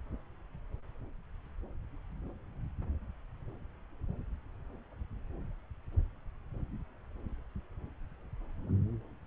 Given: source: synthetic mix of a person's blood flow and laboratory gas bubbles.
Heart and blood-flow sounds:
Doppler ultrasound of blood flow; subclavian vein
no bubbles
From the record:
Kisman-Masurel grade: 000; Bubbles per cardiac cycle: 0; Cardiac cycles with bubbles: 0%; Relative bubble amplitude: no bubbles discernible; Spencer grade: 0 (complete lack of bubble signals)

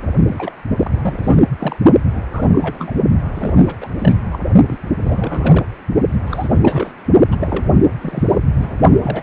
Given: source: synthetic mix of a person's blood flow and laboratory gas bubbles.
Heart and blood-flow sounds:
Doppler ultrasound of blood flow; precordium
0.27-0.57 s: bubbles
0.76-1.42 s: bubbles
1.59-1.76 s: bubbles
2.12-2.21 s: bubbles
2.32-2.92 s: bubbles
3.34-3.76 s: bubbles
3.81-3.90 s: bubbles
3.98-4.21 s: bubbles
4.32-4.38 s: bubbles
4.67-4.78 s: bubbles
5.02-5.63 s: bubbles
6.27-6.59 s: bubbles
6.62-6.92 s: bubbles
7.31-7.36 s: bubbles
7.40-7.70 s: bubbles
8.02-8.38 s: bubbles
8.59-8.76 s: bubbles
9.03-9.22 s: bubbles
From the record:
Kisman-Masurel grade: 342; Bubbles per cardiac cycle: rolling drumbeat, 9 or more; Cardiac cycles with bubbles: 100%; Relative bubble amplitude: moderate (0.250 to 0.450); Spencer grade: 3 (all of the cardiac periods contain showers or single bubble signals, but not dominating or overriding the cardiac motion signals); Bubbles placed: only in the low amplitude regions of the cardiac cycle

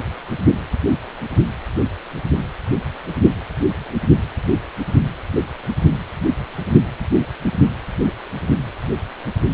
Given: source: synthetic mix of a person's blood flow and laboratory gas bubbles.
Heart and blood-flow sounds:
Doppler ultrasound of blood flow; precordium
no bubbles
From the record:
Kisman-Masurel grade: 000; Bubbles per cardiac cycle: 0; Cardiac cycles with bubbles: 0%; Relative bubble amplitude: no bubbles discernible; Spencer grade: 0 (complete lack of bubble signals)

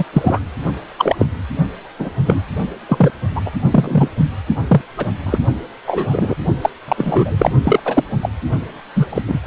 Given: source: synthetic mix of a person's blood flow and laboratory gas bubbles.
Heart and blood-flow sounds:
Doppler ultrasound of blood flow; precordium
0.00-0.05 s: bubbles
0.12-0.41 s: bubbles
0.97-1.16 s: bubbles
1.19-1.25 s: bubbles
1.98-2.09 s: bubbles
2.25-2.44 s: bubbles
2.88-3.10 s: bubbles
3.35-3.42 s: bubbles
3.46-3.50 s: bubbles
3.71-4.08 s: bubbles
4.68-4.82 s: bubbles
4.97-5.06 s: bubbles
5.26-5.40 s: bubbles
5.87-6.35 s: bubbles
6.62-6.70 s: bubbles
6.88-7.51 s: bubbles
7.63-7.80 s: bubbles
7.85-8.04 s: bubbles
8.22-8.29 s: bubbles
8.95-9.06 s: bubbles
9.09-9.22 s: bubbles
9.28-9.39 s: bubbles
From the record:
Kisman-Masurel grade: 243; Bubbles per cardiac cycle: several, 3 to 8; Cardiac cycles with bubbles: 100%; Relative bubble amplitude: loud (0.450 to 0.775); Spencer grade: 3 (all of the cardiac periods contain showers or single bubble signals, but not dominating or overriding the cardiac motion signals); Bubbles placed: only in the low amplitude regions of the cardiac cycle

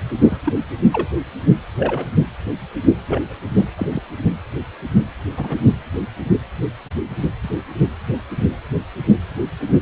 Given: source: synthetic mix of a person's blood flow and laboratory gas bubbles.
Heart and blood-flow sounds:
Doppler ultrasound of blood flow; precordium
0.21-0.38 s: bubbles
0.44-0.54 s: bubbles
0.92-1.08 s: bubbles
1.79-2.07 s: bubbles
3.08-3.21 s: bubbles
3.55-3.68 s: bubbles
3.76-4.00 s: bubbles
5.37-5.64 s: bubbles
From the record:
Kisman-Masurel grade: 122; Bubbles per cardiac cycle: 1 to 2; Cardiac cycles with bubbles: 10 to 50%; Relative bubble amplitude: moderate (0.250 to 0.450); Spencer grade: 2 (many but less than half of the cardiac periods contain bubble signals, singularly or in groups); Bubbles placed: anywhere in the cardiac cycle

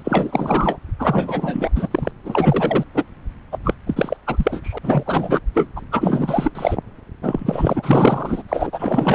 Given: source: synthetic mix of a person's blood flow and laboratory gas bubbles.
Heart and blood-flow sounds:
Doppler ultrasound of blood flow; subclavian vein
0.00-0.79 s: bubbles
0.99-1.71 s: bubbles
1.75-1.89 s: bubbles
1.91-2.12 s: bubbles
2.25-2.84 s: bubbles
2.95-3.04 s: bubbles
3.52-3.58 s: bubbles
3.64-3.75 s: bubbles
3.87-4.17 s: bubbles
4.26-4.79 s: bubbles
4.83-5.03 s: bubbles
5.05-5.40 s: bubbles
5.54-5.69 s: bubbles
5.75-5.80 s: bubbles
5.91-6.51 s: bubbles
6.55-6.77 s: bubbles
7.23-8.43 s: bubbles
8.48-9.15 s: bubbles
From the record:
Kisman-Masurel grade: 444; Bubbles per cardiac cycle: continuous sound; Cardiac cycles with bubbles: 100%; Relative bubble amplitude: maximal (0.775 to 0.999); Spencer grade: 4 (maximum detectable bubble signal sounding continuously throughout systole and diastole of every cardiac period, and overriding the amplitude of the normal cardiac signals); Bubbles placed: anywhere in the cardiac cycle

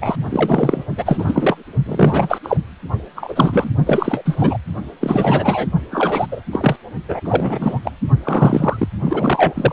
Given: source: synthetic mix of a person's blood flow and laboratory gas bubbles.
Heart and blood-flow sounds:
Doppler ultrasound of blood flow; precordium
0.01-0.16 s: bubbles
0.30-0.84 s: bubbles
0.97-1.56 s: bubbles
1.86-2.38 s: bubbles
2.43-2.57 s: bubbles
3.15-3.70 s: bubbles
3.85-4.58 s: bubbles
5.00-5.67 s: bubbles
5.91-6.27 s: bubbles
6.32-6.41 s: bubbles
6.52-6.76 s: bubbles
7.08-7.20 s: bubbles
7.25-7.79 s: bubbles
7.83-7.92 s: bubbles
8.25-8.88 s: bubbles
9.05-9.73 s: bubbles
From the record:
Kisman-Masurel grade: 333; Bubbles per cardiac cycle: rolling drumbeat, 9 or more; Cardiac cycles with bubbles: 50 to 99%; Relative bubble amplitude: loud (0.450 to 0.775); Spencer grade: 3 (all of the cardiac periods contain showers or single bubble signals, but not dominating or overriding the cardiac motion signals); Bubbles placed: only in the low amplitude regions of the cardiac cycle

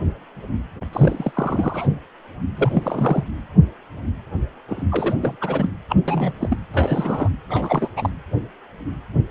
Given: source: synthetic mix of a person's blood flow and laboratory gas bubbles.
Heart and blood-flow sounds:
Doppler ultrasound of blood flow; precordium
0.92-1.87 s: bubbles
2.56-3.24 s: bubbles
4.68-4.83 s: bubbles
4.91-5.14 s: bubbles
5.17-5.37 s: bubbles
5.40-5.70 s: bubbles
5.89-5.96 s: bubbles
6.08-6.33 s: bubbles
6.40-6.56 s: bubbles
6.74-7.29 s: bubbles
7.49-7.89 s: bubbles
7.96-8.10 s: bubbles
From the record:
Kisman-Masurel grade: 332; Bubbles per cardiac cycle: rolling drumbeat, 9 or more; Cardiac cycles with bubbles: 50 to 99%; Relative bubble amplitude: moderate (0.250 to 0.450); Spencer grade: 3 (all of the cardiac periods contain showers or single bubble signals, but not dominating or overriding the cardiac motion signals); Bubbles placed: anywhere in the cardiac cycle

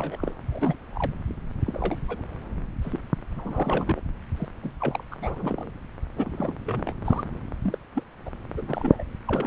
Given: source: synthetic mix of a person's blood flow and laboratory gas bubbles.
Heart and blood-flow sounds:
Doppler ultrasound of blood flow; subclavian vein
0.00-0.34 s: bubbles
0.53-0.74 s: bubbles
0.90-1.12 s: bubbles
1.66-1.96 s: bubbles
2.07-2.22 s: bubbles
2.81-2.98 s: bubbles
3.35-4.01 s: bubbles
4.37-4.49 s: bubbles
4.62-4.72 s: bubbles
4.80-5.04 s: bubbles
5.11-5.16 s: bubbles
5.21-5.70 s: bubbles
6.16-6.56 s: bubbles
6.66-6.96 s: bubbles
7.04-7.24 s: bubbles
7.62-7.78 s: bubbles
7.94-8.04 s: bubbles
8.25-8.30 s: bubbles
8.57-9.04 s: bubbles
9.27-9.47 s: bubbles
From the record:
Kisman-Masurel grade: 242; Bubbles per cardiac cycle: several, 3 to 8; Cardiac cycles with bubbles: 100%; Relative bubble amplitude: moderate (0.250 to 0.450); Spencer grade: 3 (all of the cardiac periods contain showers or single bubble signals, but not dominating or overriding the cardiac motion signals); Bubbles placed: anywhere in the cardiac cycle

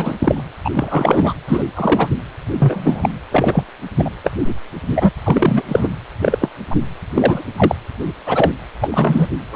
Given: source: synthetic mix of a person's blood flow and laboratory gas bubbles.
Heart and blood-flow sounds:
Doppler ultrasound of blood flow; precordium
0.00-0.16 s: bubbles
0.18-0.43 s: bubbles
0.64-0.70 s: bubbles
0.74-1.33 s: bubbles
1.47-1.69 s: bubbles
1.75-2.08 s: bubbles
2.58-3.10 s: bubbles
3.31-3.63 s: bubbles
3.98-4.10 s: bubbles
4.24-4.30 s: bubbles
4.46-4.54 s: bubbles
4.95-5.11 s: bubbles
5.24-5.62 s: bubbles
5.68-5.88 s: bubbles
6.21-6.49 s: bubbles
6.70-6.75 s: bubbles
7.14-7.43 s: bubbles
7.57-7.75 s: bubbles
8.25-8.51 s: bubbles
8.80-9.28 s: bubbles
9.52-9.56 s: bubbles
From the record:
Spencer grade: 3 (all of the cardiac periods contain showers or single bubble signals, but not dominating or overriding the cardiac motion signals); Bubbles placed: anywhere in the cardiac cycle

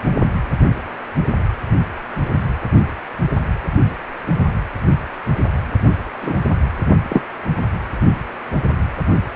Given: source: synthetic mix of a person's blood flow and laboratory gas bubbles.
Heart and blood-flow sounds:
Doppler ultrasound of blood flow; precordium
6.21-6.36 s: bubbles
7.09-7.23 s: bubbles
From the record:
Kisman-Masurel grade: 123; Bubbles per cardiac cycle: 1 to 2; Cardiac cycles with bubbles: 10 to 50%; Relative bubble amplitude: loud (0.450 to 0.775); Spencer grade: 2 (many but less than half of the cardiac periods contain bubble signals, singularly or in groups); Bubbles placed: anywhere in the cardiac cycle

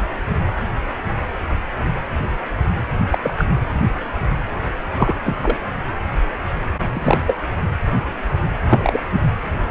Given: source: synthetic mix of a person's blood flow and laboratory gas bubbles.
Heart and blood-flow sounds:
Doppler ultrasound of blood flow; precordium
3.11-3.19 s: bubbles
3.23-3.34 s: bubbles
3.38-3.46 s: bubbles
4.96-5.14 s: bubbles
5.25-5.35 s: bubbles
5.42-5.57 s: bubbles
6.94-7.17 s: bubbles
7.27-7.45 s: bubbles
8.70-9.00 s: bubbles
From the record:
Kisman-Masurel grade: 223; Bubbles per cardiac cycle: several, 3 to 8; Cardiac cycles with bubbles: 10 to 50%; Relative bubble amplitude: loud (0.450 to 0.775); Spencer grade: 2 (many but less than half of the cardiac periods contain bubble signals, singularly or in groups); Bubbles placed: anywhere in the cardiac cycle

